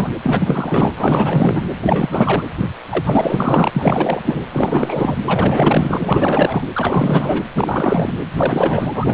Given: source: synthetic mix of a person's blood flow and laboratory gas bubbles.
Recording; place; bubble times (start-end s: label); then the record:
Doppler ultrasound of blood flow; precordium
0.00-0.09 s: bubbles
0.23-0.91 s: bubbles
0.96-1.66 s: bubbles
1.81-2.43 s: bubbles
2.89-3.70 s: bubbles
3.73-4.21 s: bubbles
4.23-4.46 s: bubbles
4.51-5.17 s: bubbles
5.24-6.64 s: bubbles
6.74-7.43 s: bubbles
7.54-8.12 s: bubbles
8.37-9.14 s: bubbles
From the record:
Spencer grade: 4 (maximum detectable bubble signal sounding continuously throughout systole and diastole of every cardiac period, and overriding the amplitude of the normal cardiac signals); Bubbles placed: anywhere in the cardiac cycle